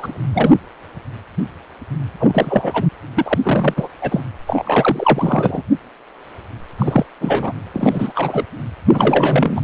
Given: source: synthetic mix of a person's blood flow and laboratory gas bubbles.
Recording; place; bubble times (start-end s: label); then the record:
Doppler ultrasound of blood flow; precordium
0.00-0.19 s: bubbles
0.33-0.54 s: bubbles
2.19-2.86 s: bubbles
3.16-3.38 s: bubbles
3.42-3.88 s: bubbles
4.01-4.21 s: bubbles
4.46-5.62 s: bubbles
6.78-7.05 s: bubbles
7.21-7.54 s: bubbles
7.74-8.44 s: bubbles
8.91-9.61 s: bubbles
From the record:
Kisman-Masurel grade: 333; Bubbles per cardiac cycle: rolling drumbeat, 9 or more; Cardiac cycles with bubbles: 50 to 99%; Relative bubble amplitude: loud (0.450 to 0.775); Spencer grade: 3 (all of the cardiac periods contain showers or single bubble signals, but not dominating or overriding the cardiac motion signals); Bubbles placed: anywhere in the cardiac cycle